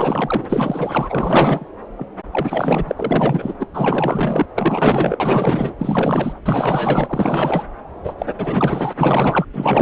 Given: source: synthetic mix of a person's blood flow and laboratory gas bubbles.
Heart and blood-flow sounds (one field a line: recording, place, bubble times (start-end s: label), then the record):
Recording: Doppler ultrasound of blood flow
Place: subclavian vein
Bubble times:
0.00-0.45 s: bubbles
0.49-1.67 s: bubbles
1.97-2.06 s: bubbles
2.32-2.92 s: bubbles
2.97-3.54 s: bubbles
3.59-3.68 s: bubbles
3.73-4.46 s: bubbles
4.54-5.17 s: bubbles
5.20-5.74 s: bubbles
5.78-6.38 s: bubbles
6.44-7.63 s: bubbles
8.03-8.14 s: bubbles
8.18-8.26 s: bubbles
8.38-8.93 s: bubbles
9.00-9.45 s: bubbles
9.54-9.82 s: bubbles
From the record:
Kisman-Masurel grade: 444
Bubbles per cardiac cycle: continuous sound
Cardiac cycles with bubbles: 100%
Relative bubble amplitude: maximal (0.775 to 0.999)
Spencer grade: 4 (maximum detectable bubble signal sounding continuously throughout systole and diastole of every cardiac period, and overriding the amplitude of the normal cardiac signals)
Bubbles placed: anywhere in the cardiac cycle